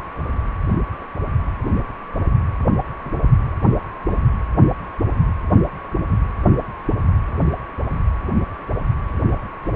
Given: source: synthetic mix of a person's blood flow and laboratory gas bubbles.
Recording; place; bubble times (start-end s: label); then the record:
Doppler ultrasound of blood flow; precordium
4.11-4.18 s: bubbles
From the record:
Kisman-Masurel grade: 111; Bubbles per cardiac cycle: 1 to 2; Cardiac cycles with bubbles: 1 to 10%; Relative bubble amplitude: barely perceptible (0.100 to 0.250); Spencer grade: 1 (occasional bubble signal discernible with the cardiac motion signal, with majority of cardiac periods free of bubbles); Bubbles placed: anywhere in the cardiac cycle